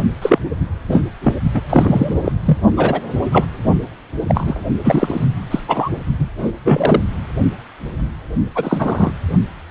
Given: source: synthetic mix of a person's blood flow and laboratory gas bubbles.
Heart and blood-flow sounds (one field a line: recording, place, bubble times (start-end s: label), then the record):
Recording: Doppler ultrasound of blood flow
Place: precordium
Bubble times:
0.22-0.38 s: bubbles
0.89-1.03 s: bubbles
1.23-1.33 s: bubbles
1.54-1.61 s: bubbles
1.69-2.14 s: bubbles
2.24-2.32 s: bubbles
2.45-2.58 s: bubbles
2.77-3.01 s: bubbles
3.31-3.46 s: bubbles
4.27-4.61 s: bubbles
4.84-5.26 s: bubbles
5.50-5.59 s: bubbles
5.68-5.89 s: bubbles
6.18-6.29 s: bubbles
6.38-6.52 s: bubbles
6.64-7.04 s: bubbles
8.55-9.12 s: bubbles
From the record:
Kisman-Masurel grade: 233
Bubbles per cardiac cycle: several, 3 to 8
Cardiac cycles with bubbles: 50 to 99%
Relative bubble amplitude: loud (0.450 to 0.775)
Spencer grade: 3 (all of the cardiac periods contain showers or single bubble signals, but not dominating or overriding the cardiac motion signals)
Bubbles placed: only in the low amplitude regions of the cardiac cycle